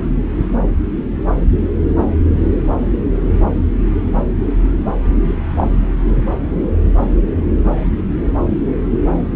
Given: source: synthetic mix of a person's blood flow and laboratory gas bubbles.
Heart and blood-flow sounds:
Doppler ultrasound of blood flow; subclavian vein
5.54-5.70 s: bubbles
From the record:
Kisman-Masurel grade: 112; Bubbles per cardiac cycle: 1 to 2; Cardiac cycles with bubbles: 1 to 10%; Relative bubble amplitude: moderate (0.250 to 0.450); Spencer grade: 1 (occasional bubble signal discernible with the cardiac motion signal, with majority of cardiac periods free of bubbles); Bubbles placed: anywhere in the cardiac cycle

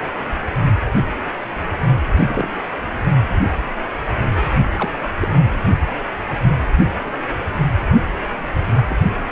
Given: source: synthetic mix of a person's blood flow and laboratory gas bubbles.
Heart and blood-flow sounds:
Doppler ultrasound of blood flow; precordium
2.19-2.48 s: bubbles
4.76-4.89 s: bubbles
5.21-5.29 s: bubbles
7.05-7.20 s: bubbles
8.87-8.96 s: bubbles
From the record:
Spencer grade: 2 (many but less than half of the cardiac periods contain bubble signals, singularly or in groups); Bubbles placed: anywhere in the cardiac cycle

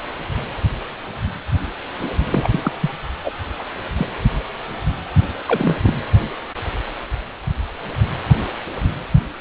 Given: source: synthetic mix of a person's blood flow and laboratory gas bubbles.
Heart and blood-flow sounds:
Doppler ultrasound of blood flow; precordium
2.25-2.72 s: bubbles
2.80-2.90 s: bubbles
3.24-3.32 s: bubbles
3.58-3.65 s: bubbles
3.97-4.07 s: bubbles
5.46-5.78 s: bubbles
5.83-5.94 s: bubbles
From the record:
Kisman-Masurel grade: 222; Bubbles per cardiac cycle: several, 3 to 8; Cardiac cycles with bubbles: 10 to 50%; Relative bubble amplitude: moderate (0.250 to 0.450); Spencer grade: 2 (many but less than half of the cardiac periods contain bubble signals, singularly or in groups); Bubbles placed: only in the low amplitude regions of the cardiac cycle

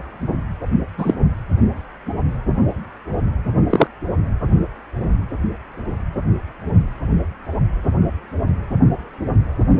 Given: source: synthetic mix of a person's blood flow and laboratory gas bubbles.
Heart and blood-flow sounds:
Doppler ultrasound of blood flow; precordium
0.97-1.14 s: bubbles
3.70-3.87 s: bubbles
From the record:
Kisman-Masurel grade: 123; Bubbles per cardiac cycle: 1 to 2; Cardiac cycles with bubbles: 10 to 50%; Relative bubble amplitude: loud (0.450 to 0.775); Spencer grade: 2 (many but less than half of the cardiac periods contain bubble signals, singularly or in groups); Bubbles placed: only in the low amplitude regions of the cardiac cycle

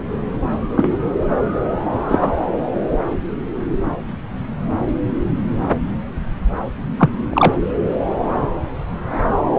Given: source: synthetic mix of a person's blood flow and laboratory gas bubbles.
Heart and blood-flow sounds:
Doppler ultrasound of blood flow; subclavian vein
0.77-0.91 s: bubbles
2.08-2.29 s: bubbles
6.99-7.10 s: bubbles
7.33-7.54 s: bubbles
From the record:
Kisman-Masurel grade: 123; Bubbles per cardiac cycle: 1 to 2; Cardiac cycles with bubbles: 10 to 50%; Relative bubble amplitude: loud (0.450 to 0.775); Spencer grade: 2 (many but less than half of the cardiac periods contain bubble signals, singularly or in groups); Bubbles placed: anywhere in the cardiac cycle

